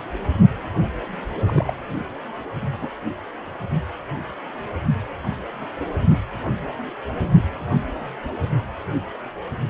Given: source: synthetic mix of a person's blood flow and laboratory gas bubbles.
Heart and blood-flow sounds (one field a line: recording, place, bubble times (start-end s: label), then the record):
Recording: Doppler ultrasound of blood flow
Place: precordium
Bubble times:
1.47-1.74 s: bubbles
2.81-2.89 s: bubbles
From the record:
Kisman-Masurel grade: 121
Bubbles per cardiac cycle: 1 to 2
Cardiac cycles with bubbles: 10 to 50%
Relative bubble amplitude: barely perceptible (0.100 to 0.250)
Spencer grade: 2 (many but less than half of the cardiac periods contain bubble signals, singularly or in groups)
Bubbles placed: only in the low amplitude regions of the cardiac cycle